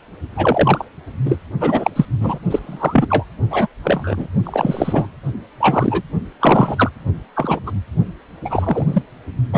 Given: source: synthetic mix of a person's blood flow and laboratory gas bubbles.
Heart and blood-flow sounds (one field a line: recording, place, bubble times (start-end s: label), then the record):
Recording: Doppler ultrasound of blood flow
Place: precordium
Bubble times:
0.36-0.85 s: bubbles
1.25-1.37 s: bubbles
1.60-1.91 s: bubbles
1.95-2.06 s: bubbles
2.21-2.39 s: bubbles
2.51-3.25 s: bubbles
3.50-3.67 s: bubbles
3.83-4.28 s: bubbles
4.43-5.08 s: bubbles
5.60-6.03 s: bubbles
6.40-6.91 s: bubbles
7.35-7.59 s: bubbles
7.66-7.71 s: bubbles
8.45-9.02 s: bubbles
9.50-9.58 s: bubbles
From the record:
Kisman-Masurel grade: 243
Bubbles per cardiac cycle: several, 3 to 8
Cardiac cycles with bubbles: 100%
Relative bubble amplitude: loud (0.450 to 0.775)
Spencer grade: 3 (all of the cardiac periods contain showers or single bubble signals, but not dominating or overriding the cardiac motion signals)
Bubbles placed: only in the low amplitude regions of the cardiac cycle